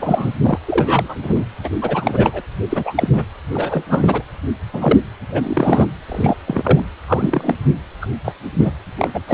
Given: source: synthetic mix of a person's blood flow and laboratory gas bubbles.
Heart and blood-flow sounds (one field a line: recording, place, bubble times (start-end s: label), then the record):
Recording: Doppler ultrasound of blood flow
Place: precordium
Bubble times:
0.01-0.34 s: bubbles
0.43-0.59 s: bubbles
0.67-1.16 s: bubbles
1.23-1.45 s: bubbles
1.64-1.69 s: bubbles
1.82-2.41 s: bubbles
2.70-3.08 s: bubbles
3.12-3.23 s: bubbles
3.53-3.86 s: bubbles
3.89-4.23 s: bubbles
4.73-4.99 s: bubbles
5.30-5.89 s: bubbles
6.08-6.37 s: bubbles
6.47-6.85 s: bubbles
7.08-7.55 s: bubbles
8.01-8.07 s: bubbles
8.24-8.32 s: bubbles
8.58-8.71 s: bubbles
8.98-9.10 s: bubbles
9.14-9.22 s: bubbles
9.27-9.34 s: bubbles
From the record:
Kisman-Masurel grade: 243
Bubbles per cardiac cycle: several, 3 to 8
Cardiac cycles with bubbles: 100%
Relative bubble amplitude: loud (0.450 to 0.775)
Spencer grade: 3 (all of the cardiac periods contain showers or single bubble signals, but not dominating or overriding the cardiac motion signals)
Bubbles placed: anywhere in the cardiac cycle